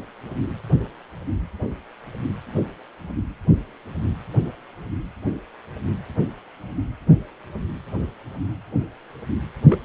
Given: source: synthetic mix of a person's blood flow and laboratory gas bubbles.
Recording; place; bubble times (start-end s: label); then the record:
Doppler ultrasound of blood flow; precordium
9.70-9.79 s: bubbles
From the record:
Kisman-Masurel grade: 111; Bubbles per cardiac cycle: 1 to 2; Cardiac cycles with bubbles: 1 to 10%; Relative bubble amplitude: barely perceptible (0.100 to 0.250); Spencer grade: 1 (occasional bubble signal discernible with the cardiac motion signal, with majority of cardiac periods free of bubbles); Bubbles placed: anywhere in the cardiac cycle